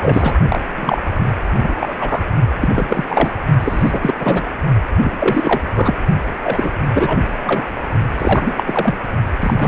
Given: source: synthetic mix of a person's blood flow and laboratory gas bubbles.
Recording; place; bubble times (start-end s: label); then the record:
Doppler ultrasound of blood flow; precordium
0.00-0.34 s: bubbles
0.49-0.61 s: bubbles
0.76-1.01 s: bubbles
1.15-1.27 s: bubbles
1.57-1.74 s: bubbles
1.80-1.94 s: bubbles
1.98-2.23 s: bubbles
2.60-3.05 s: bubbles
3.08-3.33 s: bubbles
3.60-4.14 s: bubbles
4.18-4.42 s: bubbles
5.03-5.62 s: bubbles
5.74-5.96 s: bubbles
6.43-6.71 s: bubbles
6.93-7.19 s: bubbles
7.45-7.66 s: bubbles
8.17-8.63 s: bubbles
8.66-8.95 s: bubbles
9.40-9.68 s: bubbles
From the record:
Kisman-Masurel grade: 333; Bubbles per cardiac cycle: rolling drumbeat, 9 or more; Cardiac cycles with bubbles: 50 to 99%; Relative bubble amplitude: loud (0.450 to 0.775); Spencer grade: 3 (all of the cardiac periods contain showers or single bubble signals, but not dominating or overriding the cardiac motion signals); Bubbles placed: only in the low amplitude regions of the cardiac cycle